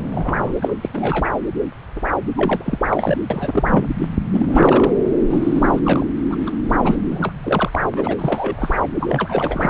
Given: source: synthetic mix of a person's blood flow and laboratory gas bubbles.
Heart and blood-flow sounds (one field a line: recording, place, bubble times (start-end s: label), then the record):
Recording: Doppler ultrasound of blood flow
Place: subclavian vein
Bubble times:
0.00-0.53 s: bubbles
0.61-0.73 s: bubbles
0.81-1.30 s: bubbles
1.96-2.00 s: bubbles
2.37-2.79 s: bubbles
2.91-3.18 s: bubbles
3.30-3.62 s: bubbles
3.71-3.89 s: bubbles
3.98-4.06 s: bubbles
4.30-4.93 s: bubbles
5.30-5.79 s: bubbles
5.83-6.06 s: bubbles
6.29-6.35 s: bubbles
6.46-6.50 s: bubbles
6.68-6.71 s: bubbles
6.81-6.99 s: bubbles
7.10-7.33 s: bubbles
7.43-7.79 s: bubbles
7.92-8.16 s: bubbles
8.19-8.75 s: bubbles
8.80-8.87 s: bubbles
9.00-9.70 s: bubbles
From the record:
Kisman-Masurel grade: 342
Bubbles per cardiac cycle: rolling drumbeat, 9 or more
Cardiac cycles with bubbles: 100%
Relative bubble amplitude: moderate (0.250 to 0.450)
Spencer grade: 3 (all of the cardiac periods contain showers or single bubble signals, but not dominating or overriding the cardiac motion signals)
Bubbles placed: anywhere in the cardiac cycle